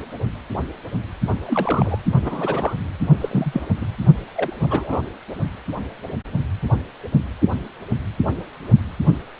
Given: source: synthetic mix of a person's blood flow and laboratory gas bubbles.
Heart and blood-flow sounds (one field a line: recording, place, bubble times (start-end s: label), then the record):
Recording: Doppler ultrasound of blood flow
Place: precordium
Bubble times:
1.45-2.01 s: bubbles
2.22-2.73 s: bubbles
3.21-3.67 s: bubbles
3.80-3.87 s: bubbles
4.35-4.54 s: bubbles
4.60-5.01 s: bubbles
From the record:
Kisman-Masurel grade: 222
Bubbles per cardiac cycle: several, 3 to 8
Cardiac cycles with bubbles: 10 to 50%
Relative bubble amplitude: moderate (0.250 to 0.450)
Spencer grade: 2 (many but less than half of the cardiac periods contain bubble signals, singularly or in groups)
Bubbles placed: only in the low amplitude regions of the cardiac cycle